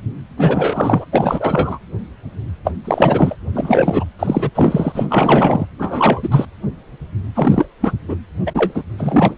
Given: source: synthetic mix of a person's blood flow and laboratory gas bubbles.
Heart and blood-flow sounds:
Doppler ultrasound of blood flow; precordium
0.37-1.05 s: bubbles
1.11-1.79 s: bubbles
2.64-2.72 s: bubbles
2.85-3.35 s: bubbles
3.53-4.04 s: bubbles
4.19-4.50 s: bubbles
4.55-5.07 s: bubbles
5.09-5.65 s: bubbles
5.79-6.46 s: bubbles
7.34-7.67 s: bubbles
7.81-7.92 s: bubbles
8.07-8.16 s: bubbles
8.46-8.52 s: bubbles
8.54-8.83 s: bubbles
8.97-9.35 s: bubbles
From the record:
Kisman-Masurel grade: 333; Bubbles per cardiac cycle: rolling drumbeat, 9 or more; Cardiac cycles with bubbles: 50 to 99%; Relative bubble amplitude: loud (0.450 to 0.775); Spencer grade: 3 (all of the cardiac periods contain showers or single bubble signals, but not dominating or overriding the cardiac motion signals); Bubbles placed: anywhere in the cardiac cycle

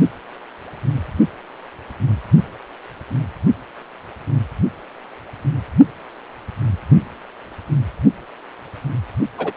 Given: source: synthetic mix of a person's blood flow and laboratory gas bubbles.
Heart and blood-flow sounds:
Doppler ultrasound of blood flow; precordium
9.38-9.52 s: bubbles
From the record:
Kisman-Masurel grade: 112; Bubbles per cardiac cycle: 1 to 2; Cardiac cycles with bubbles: 1 to 10%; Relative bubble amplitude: moderate (0.250 to 0.450); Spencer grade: 1 (occasional bubble signal discernible with the cardiac motion signal, with majority of cardiac periods free of bubbles); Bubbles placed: only in the low amplitude regions of the cardiac cycle

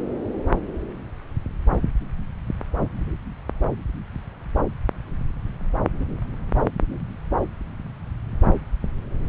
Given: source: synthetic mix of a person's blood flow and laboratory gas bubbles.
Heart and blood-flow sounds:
Doppler ultrasound of blood flow; subclavian vein
no bubbles
From the record:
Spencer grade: 0 (complete lack of bubble signals)

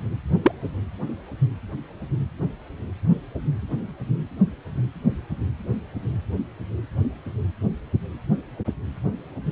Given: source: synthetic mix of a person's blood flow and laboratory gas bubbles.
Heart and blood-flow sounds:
Doppler ultrasound of blood flow; precordium
0.43-0.51 s: bubbles
From the record:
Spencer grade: 1 (occasional bubble signal discernible with the cardiac motion signal, with majority of cardiac periods free of bubbles); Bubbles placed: anywhere in the cardiac cycle

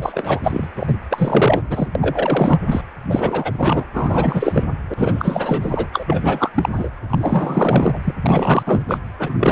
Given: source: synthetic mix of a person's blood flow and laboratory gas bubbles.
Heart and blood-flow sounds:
Doppler ultrasound of blood flow; precordium
0.00-0.40 s: bubbles
0.43-0.67 s: bubbles
0.77-0.93 s: bubbles
1.10-1.62 s: bubbles
1.69-1.88 s: bubbles
1.95-2.60 s: bubbles
2.66-2.81 s: bubbles
3.09-3.84 s: bubbles
3.93-4.66 s: bubbles
4.90-4.94 s: bubbles
4.96-5.88 s: bubbles
5.92-6.50 s: bubbles
6.54-6.69 s: bubbles
6.73-6.90 s: bubbles
7.09-7.99 s: bubbles
8.04-8.14 s: bubbles
8.23-8.82 s: bubbles
8.88-8.98 s: bubbles
9.19-9.52 s: bubbles
From the record:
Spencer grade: 4 (maximum detectable bubble signal sounding continuously throughout systole and diastole of every cardiac period, and overriding the amplitude of the normal cardiac signals); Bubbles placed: anywhere in the cardiac cycle

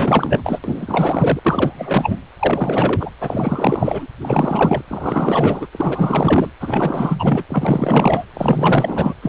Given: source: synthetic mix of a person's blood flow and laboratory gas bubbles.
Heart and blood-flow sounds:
Doppler ultrasound of blood flow; precordium
0.00-0.59 s: bubbles
0.64-1.39 s: bubbles
1.44-2.18 s: bubbles
2.39-3.10 s: bubbles
3.20-4.06 s: bubbles
4.21-4.83 s: bubbles
4.88-5.67 s: bubbles
5.73-6.50 s: bubbles
6.59-7.44 s: bubbles
7.49-8.24 s: bubbles
8.34-9.13 s: bubbles
9.21-9.28 s: bubbles
From the record:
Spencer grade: 4 (maximum detectable bubble signal sounding continuously throughout systole and diastole of every cardiac period, and overriding the amplitude of the normal cardiac signals); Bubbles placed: anywhere in the cardiac cycle

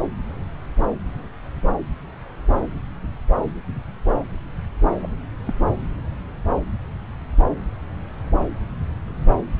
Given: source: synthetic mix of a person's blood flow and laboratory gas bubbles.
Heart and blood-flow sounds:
Doppler ultrasound of blood flow; subclavian vein
5.03-5.06 s: bubbles
5.46-5.54 s: bubbles
From the record:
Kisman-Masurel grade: 121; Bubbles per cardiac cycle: 1 to 2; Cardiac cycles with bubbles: 10 to 50%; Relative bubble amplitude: barely perceptible (0.100 to 0.250); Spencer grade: 2 (many but less than half of the cardiac periods contain bubble signals, singularly or in groups); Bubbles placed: anywhere in the cardiac cycle

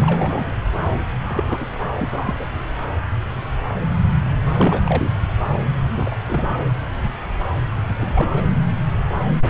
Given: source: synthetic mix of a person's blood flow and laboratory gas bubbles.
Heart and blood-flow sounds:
Doppler ultrasound of blood flow; subclavian vein
0.01-0.53 s: bubbles
1.26-1.66 s: bubbles
2.00-2.09 s: bubbles
2.12-2.35 s: bubbles
2.40-2.46 s: bubbles
4.57-4.81 s: bubbles
4.85-5.10 s: bubbles
5.97-6.15 s: bubbles
6.26-6.48 s: bubbles
7.98-8.44 s: bubbles
From the record:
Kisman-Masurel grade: 222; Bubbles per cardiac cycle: several, 3 to 8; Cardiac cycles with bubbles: 10 to 50%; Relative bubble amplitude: moderate (0.250 to 0.450); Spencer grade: 2 (many but less than half of the cardiac periods contain bubble signals, singularly or in groups); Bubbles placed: anywhere in the cardiac cycle

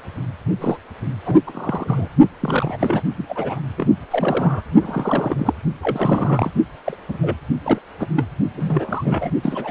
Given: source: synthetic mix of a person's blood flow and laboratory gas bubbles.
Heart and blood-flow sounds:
Doppler ultrasound of blood flow; precordium
0.60-0.78 s: bubbles
1.25-1.40 s: bubbles
1.46-2.09 s: bubbles
2.40-3.02 s: bubbles
3.18-3.25 s: bubbles
3.29-3.60 s: bubbles
3.77-3.87 s: bubbles
4.10-4.62 s: bubbles
4.80-5.54 s: bubbles
5.81-6.50 s: bubbles
6.86-6.97 s: bubbles
7.08-7.17 s: bubbles
7.21-7.37 s: bubbles
7.65-7.79 s: bubbles
7.99-8.06 s: bubbles
8.16-8.25 s: bubbles
8.55-9.30 s: bubbles
9.42-9.71 s: bubbles
From the record:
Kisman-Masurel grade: 242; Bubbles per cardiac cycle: several, 3 to 8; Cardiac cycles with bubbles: 100%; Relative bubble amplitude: moderate (0.250 to 0.450); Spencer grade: 3 (all of the cardiac periods contain showers or single bubble signals, but not dominating or overriding the cardiac motion signals); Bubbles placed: only in the low amplitude regions of the cardiac cycle

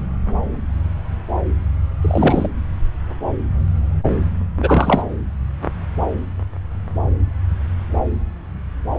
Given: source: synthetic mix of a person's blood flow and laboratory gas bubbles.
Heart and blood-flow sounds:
Doppler ultrasound of blood flow; subclavian vein
2.02-2.48 s: bubbles
4.56-5.04 s: bubbles
From the record:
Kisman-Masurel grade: 223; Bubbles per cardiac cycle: several, 3 to 8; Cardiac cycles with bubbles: 10 to 50%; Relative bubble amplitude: loud (0.450 to 0.775); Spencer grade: 2 (many but less than half of the cardiac periods contain bubble signals, singularly or in groups); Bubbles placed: anywhere in the cardiac cycle

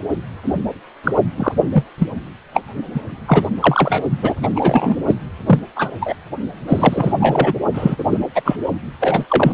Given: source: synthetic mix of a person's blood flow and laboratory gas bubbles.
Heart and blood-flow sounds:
Doppler ultrasound of blood flow; precordium
0.45-0.53 s: bubbles
1.03-1.11 s: bubbles
1.37-1.52 s: bubbles
1.72-1.84 s: bubbles
1.98-2.08 s: bubbles
2.54-2.61 s: bubbles
2.94-3.01 s: bubbles
3.27-3.49 s: bubbles
3.60-4.03 s: bubbles
4.22-4.35 s: bubbles
4.42-4.48 s: bubbles
4.53-4.96 s: bubbles
5.08-5.14 s: bubbles
5.47-5.60 s: bubbles
5.76-5.90 s: bubbles
6.00-6.16 s: bubbles
6.67-7.52 s: bubbles
7.73-7.96 s: bubbles
7.98-8.04 s: bubbles
8.11-8.20 s: bubbles
8.35-8.42 s: bubbles
8.45-8.57 s: bubbles
9.00-9.25 s: bubbles
9.29-9.53 s: bubbles
From the record:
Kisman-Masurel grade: 243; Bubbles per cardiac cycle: several, 3 to 8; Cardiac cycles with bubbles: 100%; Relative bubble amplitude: loud (0.450 to 0.775); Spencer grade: 3 (all of the cardiac periods contain showers or single bubble signals, but not dominating or overriding the cardiac motion signals); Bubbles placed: only in the low amplitude regions of the cardiac cycle

